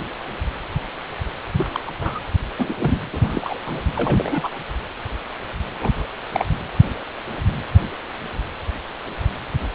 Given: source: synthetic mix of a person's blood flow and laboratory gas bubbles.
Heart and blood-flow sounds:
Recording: Doppler ultrasound of blood flow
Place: precordium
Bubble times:
1.54-1.80 s: bubbles
1.86-1.92 s: bubbles
1.99-2.20 s: bubbles
2.58-2.73 s: bubbles
2.77-2.98 s: bubbles
3.12-3.59 s: bubbles
3.66-3.82 s: bubbles
3.95-4.49 s: bubbles
5.79-6.05 s: bubbles
6.33-6.46 s: bubbles
From the record:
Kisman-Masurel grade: 222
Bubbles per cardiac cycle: several, 3 to 8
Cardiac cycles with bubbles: 10 to 50%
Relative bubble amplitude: moderate (0.250 to 0.450)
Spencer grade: 2 (many but less than half of the cardiac periods contain bubble signals, singularly or in groups)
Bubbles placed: anywhere in the cardiac cycle

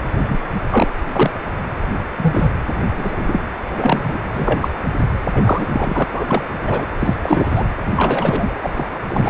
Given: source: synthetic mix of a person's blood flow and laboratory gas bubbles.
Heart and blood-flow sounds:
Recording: Doppler ultrasound of blood flow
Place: precordium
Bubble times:
0.21-0.38 s: bubbles
0.70-0.88 s: bubbles
1.13-1.30 s: bubbles
2.17-2.51 s: bubbles
2.96-3.41 s: bubbles
3.63-4.25 s: bubbles
4.33-4.71 s: bubbles
5.34-6.04 s: bubbles
6.12-6.50 s: bubbles
6.62-6.86 s: bubbles
6.99-7.16 s: bubbles
7.21-7.65 s: bubbles
7.96-8.54 s: bubbles
8.62-8.73 s: bubbles
8.76-8.88 s: bubbles
9.09-9.30 s: bubbles
From the record:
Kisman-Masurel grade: 243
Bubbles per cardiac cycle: several, 3 to 8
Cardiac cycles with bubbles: 100%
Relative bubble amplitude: loud (0.450 to 0.775)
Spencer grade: 3 (all of the cardiac periods contain showers or single bubble signals, but not dominating or overriding the cardiac motion signals)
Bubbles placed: anywhere in the cardiac cycle

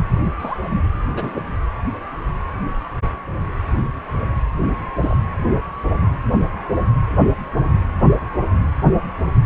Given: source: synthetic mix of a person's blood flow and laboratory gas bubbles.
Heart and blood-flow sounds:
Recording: Doppler ultrasound of blood flow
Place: precordium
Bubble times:
0.23-0.32 s: bubbles
0.39-0.58 s: bubbles
1.14-1.42 s: bubbles
4.60-4.68 s: bubbles
4.96-5.17 s: bubbles
From the record:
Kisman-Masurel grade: 121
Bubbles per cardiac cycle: 1 to 2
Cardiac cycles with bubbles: 10 to 50%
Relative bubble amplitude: barely perceptible (0.100 to 0.250)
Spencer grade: 2 (many but less than half of the cardiac periods contain bubble signals, singularly or in groups)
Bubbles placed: anywhere in the cardiac cycle

